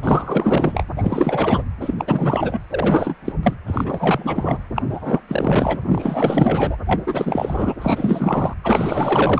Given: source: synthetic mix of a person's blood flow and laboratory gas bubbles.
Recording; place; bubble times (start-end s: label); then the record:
Doppler ultrasound of blood flow; precordium
0.02-0.83 s: bubbles
0.97-1.65 s: bubbles
1.80-1.95 s: bubbles
1.99-2.60 s: bubbles
2.71-3.15 s: bubbles
3.25-3.33 s: bubbles
3.43-3.54 s: bubbles
3.67-4.58 s: bubbles
4.75-4.82 s: bubbles
4.90-6.76 s: bubbles
6.87-7.02 s: bubbles
7.06-7.74 s: bubbles
7.77-8.54 s: bubbles
8.63-9.40 s: bubbles
From the record:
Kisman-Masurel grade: 444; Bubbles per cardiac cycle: continuous sound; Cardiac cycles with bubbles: 100%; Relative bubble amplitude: maximal (0.775 to 0.999); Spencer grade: 4 (maximum detectable bubble signal sounding continuously throughout systole and diastole of every cardiac period, and overriding the amplitude of the normal cardiac signals); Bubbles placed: anywhere in the cardiac cycle